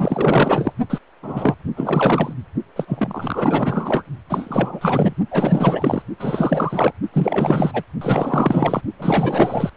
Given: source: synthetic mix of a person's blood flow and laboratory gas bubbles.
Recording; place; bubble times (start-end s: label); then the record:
Doppler ultrasound of blood flow; precordium
0.00-0.73 s: bubbles
0.90-0.98 s: bubbles
1.22-1.54 s: bubbles
1.76-2.33 s: bubbles
2.76-4.03 s: bubbles
4.29-5.13 s: bubbles
5.30-6.02 s: bubbles
6.19-6.92 s: bubbles
7.12-7.83 s: bubbles
8.01-8.81 s: bubbles
8.98-9.70 s: bubbles
From the record:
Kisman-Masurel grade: 444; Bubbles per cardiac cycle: continuous sound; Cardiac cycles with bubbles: 100%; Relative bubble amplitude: maximal (0.775 to 0.999); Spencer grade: 4 (maximum detectable bubble signal sounding continuously throughout systole and diastole of every cardiac period, and overriding the amplitude of the normal cardiac signals); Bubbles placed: only in the low amplitude regions of the cardiac cycle